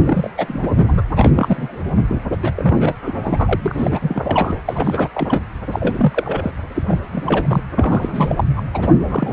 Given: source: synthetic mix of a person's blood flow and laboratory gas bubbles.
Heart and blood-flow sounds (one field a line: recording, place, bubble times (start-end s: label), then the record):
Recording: Doppler ultrasound of blood flow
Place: precordium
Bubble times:
0.00-0.30 s: bubbles
0.37-0.72 s: bubbles
0.76-1.02 s: bubbles
1.16-1.31 s: bubbles
1.35-1.84 s: bubbles
1.97-2.03 s: bubbles
2.08-2.15 s: bubbles
2.42-2.52 s: bubbles
2.56-2.96 s: bubbles
3.02-3.16 s: bubbles
3.23-4.56 s: bubbles
4.67-5.09 s: bubbles
5.14-5.41 s: bubbles
5.71-6.53 s: bubbles
6.75-6.82 s: bubbles
6.88-7.63 s: bubbles
7.74-8.44 s: bubbles
8.56-8.62 s: bubbles
8.73-8.88 s: bubbles
9.04-9.33 s: bubbles
From the record:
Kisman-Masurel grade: 342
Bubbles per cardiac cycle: rolling drumbeat, 9 or more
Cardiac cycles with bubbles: 100%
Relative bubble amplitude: moderate (0.250 to 0.450)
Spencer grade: 3 (all of the cardiac periods contain showers or single bubble signals, but not dominating or overriding the cardiac motion signals)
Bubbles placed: anywhere in the cardiac cycle